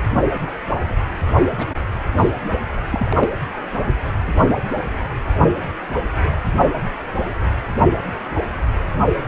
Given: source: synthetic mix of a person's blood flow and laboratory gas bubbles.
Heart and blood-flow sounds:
Doppler ultrasound of blood flow; precordium
1.57-1.66 s: bubbles
2.15-2.31 s: bubbles
2.90-3.29 s: bubbles
From the record:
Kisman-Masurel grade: 212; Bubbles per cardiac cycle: several, 3 to 8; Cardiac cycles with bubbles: 1 to 10%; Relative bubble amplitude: moderate (0.250 to 0.450); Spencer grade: 1 (occasional bubble signal discernible with the cardiac motion signal, with majority of cardiac periods free of bubbles); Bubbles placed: anywhere in the cardiac cycle

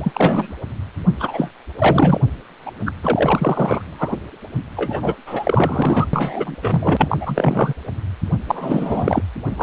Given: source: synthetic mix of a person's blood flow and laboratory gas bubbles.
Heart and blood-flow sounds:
Doppler ultrasound of blood flow; precordium
0.00-0.53 s: bubbles
1.19-1.50 s: bubbles
1.78-2.21 s: bubbles
2.66-2.71 s: bubbles
2.86-2.92 s: bubbles
3.03-4.17 s: bubbles
4.76-5.15 s: bubbles
5.26-6.07 s: bubbles
6.13-6.56 s: bubbles
6.62-7.17 s: bubbles
7.21-7.73 s: bubbles
8.47-9.22 s: bubbles
9.45-9.63 s: bubbles
From the record:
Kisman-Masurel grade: 343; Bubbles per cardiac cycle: rolling drumbeat, 9 or more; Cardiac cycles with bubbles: 100%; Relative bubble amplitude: loud (0.450 to 0.775); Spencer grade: 3 (all of the cardiac periods contain showers or single bubble signals, but not dominating or overriding the cardiac motion signals); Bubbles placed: anywhere in the cardiac cycle

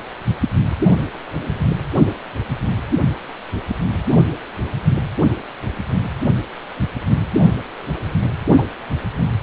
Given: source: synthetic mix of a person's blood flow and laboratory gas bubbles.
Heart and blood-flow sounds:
Doppler ultrasound of blood flow; precordium
8.57-8.65 s: bubbles
From the record:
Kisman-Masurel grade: 113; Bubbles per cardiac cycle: 1 to 2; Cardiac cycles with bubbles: 1 to 10%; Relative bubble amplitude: loud (0.450 to 0.775); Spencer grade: 1 (occasional bubble signal discernible with the cardiac motion signal, with majority of cardiac periods free of bubbles); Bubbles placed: anywhere in the cardiac cycle

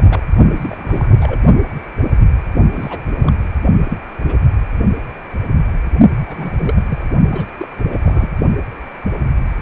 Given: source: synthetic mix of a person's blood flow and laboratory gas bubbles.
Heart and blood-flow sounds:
Doppler ultrasound of blood flow; precordium
0.00-0.22 s: bubbles
0.56-1.17 s: bubbles
1.20-1.39 s: bubbles
2.73-3.01 s: bubbles
3.21-3.35 s: bubbles
3.84-3.98 s: bubbles
4.25-4.36 s: bubbles
6.26-7.07 s: bubbles
7.31-7.46 s: bubbles
7.58-7.67 s: bubbles
7.77-7.99 s: bubbles
8.03-8.29 s: bubbles
From the record:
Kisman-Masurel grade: 222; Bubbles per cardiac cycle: several, 3 to 8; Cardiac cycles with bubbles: 10 to 50%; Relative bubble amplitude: moderate (0.250 to 0.450); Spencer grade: 2 (many but less than half of the cardiac periods contain bubble signals, singularly or in groups); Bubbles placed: only in the low amplitude regions of the cardiac cycle

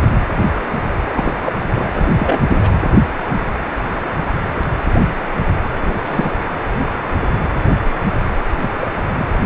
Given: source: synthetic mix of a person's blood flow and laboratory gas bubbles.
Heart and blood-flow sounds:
Doppler ultrasound of blood flow; precordium
1.10-1.34 s: bubbles
1.41-1.52 s: bubbles
1.64-2.40 s: bubbles
2.48-2.60 s: bubbles
2.62-2.72 s: bubbles
5.82-5.92 s: bubbles
6.07-6.35 s: bubbles
8.62-8.69 s: bubbles
8.79-8.88 s: bubbles
9.14-9.25 s: bubbles
From the record:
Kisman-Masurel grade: 222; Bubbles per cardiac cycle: several, 3 to 8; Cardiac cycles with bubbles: 10 to 50%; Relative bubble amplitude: moderate (0.250 to 0.450); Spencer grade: 2 (many but less than half of the cardiac periods contain bubble signals, singularly or in groups); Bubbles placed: anywhere in the cardiac cycle

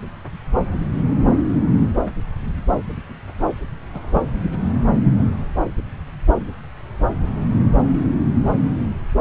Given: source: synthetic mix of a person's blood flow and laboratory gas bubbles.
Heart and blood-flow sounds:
Doppler ultrasound of blood flow; subclavian vein
3.94-4.00 s: bubbles
4.13-4.21 s: bubbles
From the record:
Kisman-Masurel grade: 122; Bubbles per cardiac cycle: 1 to 2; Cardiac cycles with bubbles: 10 to 50%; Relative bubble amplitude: moderate (0.250 to 0.450); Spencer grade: 2 (many but less than half of the cardiac periods contain bubble signals, singularly or in groups); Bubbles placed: anywhere in the cardiac cycle

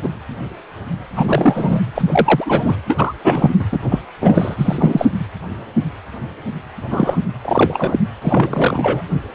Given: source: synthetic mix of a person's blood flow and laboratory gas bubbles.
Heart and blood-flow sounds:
Doppler ultrasound of blood flow; precordium
0.03-0.10 s: bubbles
1.12-1.81 s: bubbles
1.95-2.76 s: bubbles
2.88-3.15 s: bubbles
3.23-3.54 s: bubbles
3.59-3.64 s: bubbles
3.72-3.79 s: bubbles
3.88-4.00 s: bubbles
4.21-4.56 s: bubbles
4.58-5.05 s: bubbles
5.18-5.25 s: bubbles
6.91-7.17 s: bubbles
7.45-8.00 s: bubbles
8.22-9.03 s: bubbles
From the record:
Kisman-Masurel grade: 333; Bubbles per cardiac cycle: rolling drumbeat, 9 or more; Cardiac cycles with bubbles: 50 to 99%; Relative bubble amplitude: loud (0.450 to 0.775); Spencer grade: 3 (all of the cardiac periods contain showers or single bubble signals, but not dominating or overriding the cardiac motion signals); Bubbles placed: anywhere in the cardiac cycle

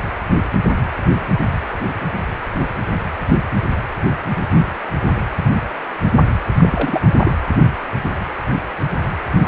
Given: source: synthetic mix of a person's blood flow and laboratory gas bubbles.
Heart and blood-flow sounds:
Doppler ultrasound of blood flow; precordium
6.58-7.01 s: bubbles
7.12-7.31 s: bubbles
9.42-9.48 s: bubbles
From the record:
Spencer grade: 2 (many but less than half of the cardiac periods contain bubble signals, singularly or in groups); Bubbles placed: anywhere in the cardiac cycle

